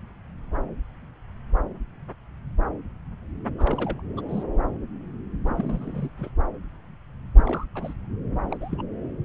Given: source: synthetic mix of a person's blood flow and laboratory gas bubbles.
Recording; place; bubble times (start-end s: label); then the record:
Doppler ultrasound of blood flow; subclavian vein
3.58-4.02 s: bubbles
4.17-4.21 s: bubbles
4.29-4.44 s: bubbles
5.45-6.10 s: bubbles
6.17-6.31 s: bubbles
7.38-7.65 s: bubbles
7.75-7.94 s: bubbles
8.52-8.57 s: bubbles
8.60-8.82 s: bubbles
From the record:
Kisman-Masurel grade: 221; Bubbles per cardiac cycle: several, 3 to 8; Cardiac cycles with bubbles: 10 to 50%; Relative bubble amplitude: barely perceptible (0.100 to 0.250); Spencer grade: 2 (many but less than half of the cardiac periods contain bubble signals, singularly or in groups); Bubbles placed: anywhere in the cardiac cycle